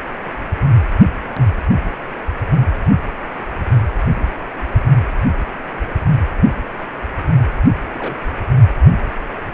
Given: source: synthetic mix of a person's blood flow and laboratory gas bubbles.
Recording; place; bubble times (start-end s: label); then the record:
Doppler ultrasound of blood flow; precordium
7.93-8.20 s: bubbles
From the record:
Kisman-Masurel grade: 111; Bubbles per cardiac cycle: 1 to 2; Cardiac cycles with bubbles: 1 to 10%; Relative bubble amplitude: barely perceptible (0.100 to 0.250); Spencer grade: 1 (occasional bubble signal discernible with the cardiac motion signal, with majority of cardiac periods free of bubbles); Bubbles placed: anywhere in the cardiac cycle